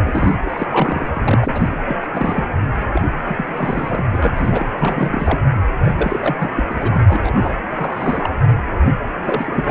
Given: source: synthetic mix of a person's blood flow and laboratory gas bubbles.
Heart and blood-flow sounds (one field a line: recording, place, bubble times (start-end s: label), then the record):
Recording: Doppler ultrasound of blood flow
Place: precordium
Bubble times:
0.00-0.37 s: bubbles
0.45-0.67 s: bubbles
0.70-1.10 s: bubbles
1.14-1.79 s: bubbles
1.88-1.95 s: bubbles
2.02-2.07 s: bubbles
2.12-2.45 s: bubbles
2.93-3.02 s: bubbles
3.25-4.06 s: bubbles
4.11-4.66 s: bubbles
4.78-5.39 s: bubbles
5.84-5.92 s: bubbles
5.97-6.50 s: bubbles
6.56-6.63 s: bubbles
6.70-7.01 s: bubbles
7.08-7.56 s: bubbles
7.71-8.29 s: bubbles
9.24-9.71 s: bubbles
From the record:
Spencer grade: 3 (all of the cardiac periods contain showers or single bubble signals, but not dominating or overriding the cardiac motion signals)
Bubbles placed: anywhere in the cardiac cycle